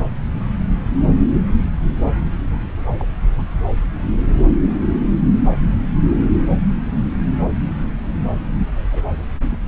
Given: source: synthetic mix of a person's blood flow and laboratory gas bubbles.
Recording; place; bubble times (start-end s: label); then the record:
Doppler ultrasound of blood flow; subclavian vein
0.00-0.18 s: bubbles
2.86-2.94 s: bubbles
3.00-3.05 s: bubbles
3.38-3.43 s: bubbles
8.92-9.04 s: bubbles
9.51-9.59 s: bubbles
From the record:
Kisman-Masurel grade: 121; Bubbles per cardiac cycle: 1 to 2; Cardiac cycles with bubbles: 10 to 50%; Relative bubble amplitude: barely perceptible (0.100 to 0.250); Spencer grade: 2 (many but less than half of the cardiac periods contain bubble signals, singularly or in groups); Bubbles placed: anywhere in the cardiac cycle